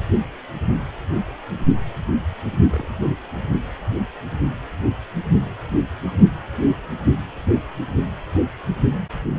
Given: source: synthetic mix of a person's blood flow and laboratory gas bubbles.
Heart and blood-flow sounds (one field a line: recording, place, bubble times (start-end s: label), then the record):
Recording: Doppler ultrasound of blood flow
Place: precordium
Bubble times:
2.70-2.89 s: bubbles
From the record:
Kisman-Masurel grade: 121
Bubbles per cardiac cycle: 1 to 2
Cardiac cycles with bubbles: 10 to 50%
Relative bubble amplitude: barely perceptible (0.100 to 0.250)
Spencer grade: 2 (many but less than half of the cardiac periods contain bubble signals, singularly or in groups)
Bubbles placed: only in the low amplitude regions of the cardiac cycle